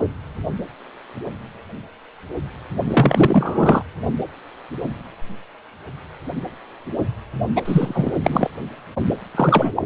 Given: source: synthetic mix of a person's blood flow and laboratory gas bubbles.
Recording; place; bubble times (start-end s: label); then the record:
Doppler ultrasound of blood flow; precordium
2.87-3.83 s: bubbles
7.56-7.62 s: bubbles
7.65-8.12 s: bubbles
8.22-8.50 s: bubbles
9.34-9.71 s: bubbles
9.75-9.83 s: bubbles
From the record:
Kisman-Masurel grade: 223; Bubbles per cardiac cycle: several, 3 to 8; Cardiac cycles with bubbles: 10 to 50%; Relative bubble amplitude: loud (0.450 to 0.775); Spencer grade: 2 (many but less than half of the cardiac periods contain bubble signals, singularly or in groups); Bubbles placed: anywhere in the cardiac cycle